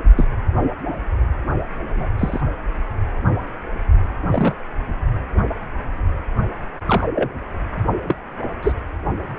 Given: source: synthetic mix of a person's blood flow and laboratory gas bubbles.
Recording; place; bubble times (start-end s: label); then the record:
Doppler ultrasound of blood flow; precordium
0.16-0.25 s: bubbles
1.89-2.07 s: bubbles
2.18-2.41 s: bubbles
4.27-4.54 s: bubbles
6.86-7.04 s: bubbles
7.15-7.30 s: bubbles
8.08-8.15 s: bubbles
8.62-8.72 s: bubbles
From the record:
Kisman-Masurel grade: 122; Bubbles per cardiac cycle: 1 to 2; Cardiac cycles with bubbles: 10 to 50%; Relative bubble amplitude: moderate (0.250 to 0.450); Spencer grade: 2 (many but less than half of the cardiac periods contain bubble signals, singularly or in groups); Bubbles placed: only in the low amplitude regions of the cardiac cycle